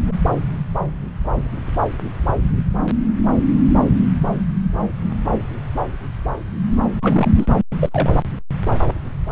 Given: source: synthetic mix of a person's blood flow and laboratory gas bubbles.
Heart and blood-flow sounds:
Doppler ultrasound of blood flow; subclavian vein
7.02-7.29 s: bubbles
7.36-7.47 s: bubbles
7.80-8.10 s: bubbles
From the record:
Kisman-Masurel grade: 212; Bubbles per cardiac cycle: several, 3 to 8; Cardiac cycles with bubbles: 1 to 10%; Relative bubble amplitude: moderate (0.250 to 0.450); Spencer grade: 1 (occasional bubble signal discernible with the cardiac motion signal, with majority of cardiac periods free of bubbles); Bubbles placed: anywhere in the cardiac cycle

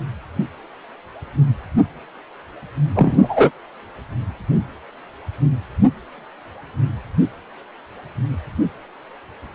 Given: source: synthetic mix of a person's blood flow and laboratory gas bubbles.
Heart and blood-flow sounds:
Doppler ultrasound of blood flow; precordium
2.95-3.51 s: bubbles
From the record:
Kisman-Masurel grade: 213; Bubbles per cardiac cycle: several, 3 to 8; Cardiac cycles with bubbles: 1 to 10%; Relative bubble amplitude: loud (0.450 to 0.775); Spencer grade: 1 (occasional bubble signal discernible with the cardiac motion signal, with majority of cardiac periods free of bubbles); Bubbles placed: anywhere in the cardiac cycle

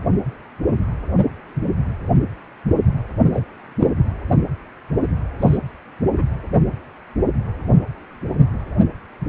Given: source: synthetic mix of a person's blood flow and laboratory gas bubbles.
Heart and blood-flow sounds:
Doppler ultrasound of blood flow; precordium
3.33-3.45 s: bubbles
3.78-3.87 s: bubbles
5.41-5.58 s: bubbles
6.16-6.23 s: bubbles
From the record:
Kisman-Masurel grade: 123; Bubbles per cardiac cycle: 1 to 2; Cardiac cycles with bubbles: 10 to 50%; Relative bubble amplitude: loud (0.450 to 0.775); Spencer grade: 2 (many but less than half of the cardiac periods contain bubble signals, singularly or in groups); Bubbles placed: anywhere in the cardiac cycle

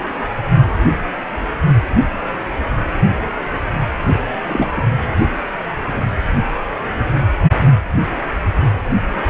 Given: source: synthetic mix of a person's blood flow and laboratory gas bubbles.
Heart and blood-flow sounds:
Doppler ultrasound of blood flow; precordium
4.46-4.71 s: bubbles
4.76-4.81 s: bubbles
From the record:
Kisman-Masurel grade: 223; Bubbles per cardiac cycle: several, 3 to 8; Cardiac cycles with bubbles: 10 to 50%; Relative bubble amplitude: loud (0.450 to 0.775); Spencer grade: 2 (many but less than half of the cardiac periods contain bubble signals, singularly or in groups); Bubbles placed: only in the low amplitude regions of the cardiac cycle

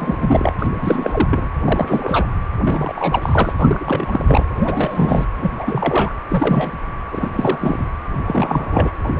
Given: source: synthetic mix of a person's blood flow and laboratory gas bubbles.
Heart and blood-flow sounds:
Doppler ultrasound of blood flow; precordium
0.00-0.55 s: bubbles
0.58-0.67 s: bubbles
0.75-1.52 s: bubbles
1.65-2.27 s: bubbles
2.65-2.93 s: bubbles
2.95-3.53 s: bubbles
3.58-4.46 s: bubbles
4.54-5.25 s: bubbles
5.38-5.52 s: bubbles
5.55-6.12 s: bubbles
6.28-6.79 s: bubbles
7.12-7.29 s: bubbles
7.33-7.58 s: bubbles
7.61-7.85 s: bubbles
8.25-8.92 s: bubbles
9.04-9.12 s: bubbles
9.17-9.20 s: bubbles
From the record:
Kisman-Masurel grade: 332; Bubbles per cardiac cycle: rolling drumbeat, 9 or more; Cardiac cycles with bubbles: 50 to 99%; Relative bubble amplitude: moderate (0.250 to 0.450); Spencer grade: 3 (all of the cardiac periods contain showers or single bubble signals, but not dominating or overriding the cardiac motion signals); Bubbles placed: anywhere in the cardiac cycle

